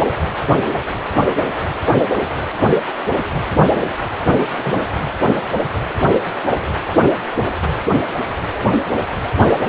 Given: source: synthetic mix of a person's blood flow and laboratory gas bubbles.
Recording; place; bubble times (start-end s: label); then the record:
Doppler ultrasound of blood flow; precordium
4.38-4.52 s: bubbles
4.62-4.75 s: bubbles
From the record:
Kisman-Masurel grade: 112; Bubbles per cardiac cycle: 1 to 2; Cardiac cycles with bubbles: 1 to 10%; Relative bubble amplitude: moderate (0.250 to 0.450); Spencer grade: 1 (occasional bubble signal discernible with the cardiac motion signal, with majority of cardiac periods free of bubbles); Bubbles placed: anywhere in the cardiac cycle